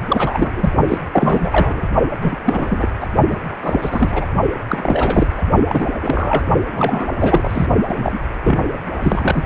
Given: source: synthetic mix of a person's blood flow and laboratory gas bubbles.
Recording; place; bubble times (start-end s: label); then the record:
Doppler ultrasound of blood flow; precordium
0.06-0.73 s: bubbles
0.88-0.98 s: bubbles
1.12-1.89 s: bubbles
2.21-2.36 s: bubbles
2.44-2.88 s: bubbles
3.01-3.08 s: bubbles
3.30-3.37 s: bubbles
3.63-4.25 s: bubbles
4.68-5.27 s: bubbles
5.37-5.42 s: bubbles
5.68-5.88 s: bubbles
5.93-6.46 s: bubbles
6.72-7.08 s: bubbles
7.18-7.68 s: bubbles
7.89-8.23 s: bubbles
8.44-8.59 s: bubbles
9.01-9.45 s: bubbles
From the record:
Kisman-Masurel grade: 343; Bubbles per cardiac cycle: rolling drumbeat, 9 or more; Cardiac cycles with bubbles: 100%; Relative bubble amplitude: loud (0.450 to 0.775); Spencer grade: 3 (all of the cardiac periods contain showers or single bubble signals, but not dominating or overriding the cardiac motion signals); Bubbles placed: only in the low amplitude regions of the cardiac cycle